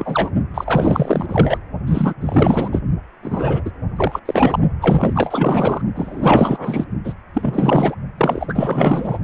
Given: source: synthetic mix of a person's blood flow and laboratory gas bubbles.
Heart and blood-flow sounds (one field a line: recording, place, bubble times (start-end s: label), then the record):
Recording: Doppler ultrasound of blood flow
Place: precordium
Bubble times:
0.00-0.30 s: bubbles
0.54-1.58 s: bubbles
1.87-2.14 s: bubbles
2.20-2.80 s: bubbles
3.22-3.62 s: bubbles
3.65-3.71 s: bubbles
3.96-4.19 s: bubbles
4.25-4.59 s: bubbles
4.81-5.81 s: bubbles
5.96-6.84 s: bubbles
7.04-7.13 s: bubbles
7.33-7.95 s: bubbles
8.18-9.18 s: bubbles
From the record:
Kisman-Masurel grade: 444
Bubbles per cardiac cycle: continuous sound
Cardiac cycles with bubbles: 100%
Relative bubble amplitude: maximal (0.775 to 0.999)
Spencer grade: 4 (maximum detectable bubble signal sounding continuously throughout systole and diastole of every cardiac period, and overriding the amplitude of the normal cardiac signals)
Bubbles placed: only in the low amplitude regions of the cardiac cycle